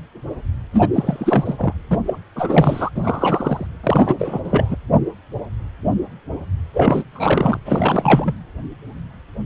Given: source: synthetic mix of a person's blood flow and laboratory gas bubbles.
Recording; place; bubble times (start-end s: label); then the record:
Doppler ultrasound of blood flow; precordium
0.73-0.89 s: bubbles
0.93-1.56 s: bubbles
1.58-1.73 s: bubbles
1.91-1.99 s: bubbles
2.06-2.19 s: bubbles
2.35-2.90 s: bubbles
2.94-3.67 s: bubbles
3.83-4.15 s: bubbles
4.18-4.40 s: bubbles
4.44-4.75 s: bubbles
6.73-7.04 s: bubbles
7.13-7.57 s: bubbles
7.65-8.33 s: bubbles
From the record:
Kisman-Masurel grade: 333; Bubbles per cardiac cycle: rolling drumbeat, 9 or more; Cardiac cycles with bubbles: 50 to 99%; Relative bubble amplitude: loud (0.450 to 0.775); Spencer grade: 3 (all of the cardiac periods contain showers or single bubble signals, but not dominating or overriding the cardiac motion signals); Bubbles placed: anywhere in the cardiac cycle